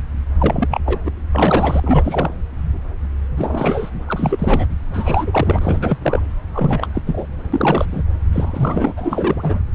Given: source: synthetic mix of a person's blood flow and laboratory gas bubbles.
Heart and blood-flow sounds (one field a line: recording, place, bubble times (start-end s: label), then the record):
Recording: Doppler ultrasound of blood flow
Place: subclavian vein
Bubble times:
0.39-0.81 s: bubbles
0.85-0.99 s: bubbles
1.04-1.11 s: bubbles
1.35-2.33 s: bubbles
3.37-3.90 s: bubbles
4.06-4.66 s: bubbles
4.84-5.98 s: bubbles
6.02-6.20 s: bubbles
6.52-6.88 s: bubbles
6.94-7.02 s: bubbles
7.06-7.26 s: bubbles
7.52-7.85 s: bubbles
7.91-8.03 s: bubbles
8.33-8.94 s: bubbles
8.97-9.60 s: bubbles
From the record:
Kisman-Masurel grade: 333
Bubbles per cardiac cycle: rolling drumbeat, 9 or more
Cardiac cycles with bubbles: 50 to 99%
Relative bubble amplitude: loud (0.450 to 0.775)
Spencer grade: 3 (all of the cardiac periods contain showers or single bubble signals, but not dominating or overriding the cardiac motion signals)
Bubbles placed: anywhere in the cardiac cycle